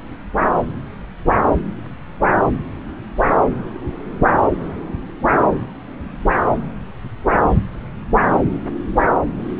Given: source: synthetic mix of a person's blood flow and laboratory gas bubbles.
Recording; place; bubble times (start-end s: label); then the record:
Doppler ultrasound of blood flow; subclavian vein
no bubbles
From the record:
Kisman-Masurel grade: 000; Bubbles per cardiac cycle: 0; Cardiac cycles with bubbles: 0%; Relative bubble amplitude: no bubbles discernible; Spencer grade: 0 (complete lack of bubble signals)